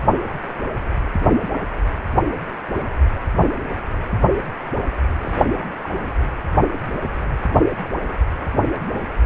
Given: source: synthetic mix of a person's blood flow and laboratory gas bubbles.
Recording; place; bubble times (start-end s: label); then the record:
Doppler ultrasound of blood flow; precordium
5.20-5.43 s: bubbles
5.83-5.89 s: bubbles
6.03-6.11 s: bubbles
From the record:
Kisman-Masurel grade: 221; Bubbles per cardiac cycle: several, 3 to 8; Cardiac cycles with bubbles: 10 to 50%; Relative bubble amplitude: barely perceptible (0.100 to 0.250); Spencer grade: 2 (many but less than half of the cardiac periods contain bubble signals, singularly or in groups); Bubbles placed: anywhere in the cardiac cycle